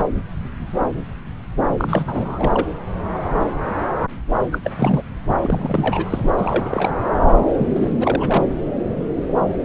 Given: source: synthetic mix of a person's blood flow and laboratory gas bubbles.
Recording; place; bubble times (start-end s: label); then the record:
Doppler ultrasound of blood flow; subclavian vein
0.00-0.06 s: bubbles
1.77-2.67 s: bubbles
4.51-4.58 s: bubbles
4.64-4.71 s: bubbles
4.76-5.02 s: bubbles
5.42-6.22 s: bubbles
6.37-6.94 s: bubbles
7.58-7.91 s: bubbles
8.00-8.45 s: bubbles
From the record:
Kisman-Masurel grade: 332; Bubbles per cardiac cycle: rolling drumbeat, 9 or more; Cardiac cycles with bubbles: 50 to 99%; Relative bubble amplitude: moderate (0.250 to 0.450); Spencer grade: 3 (all of the cardiac periods contain showers or single bubble signals, but not dominating or overriding the cardiac motion signals); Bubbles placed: anywhere in the cardiac cycle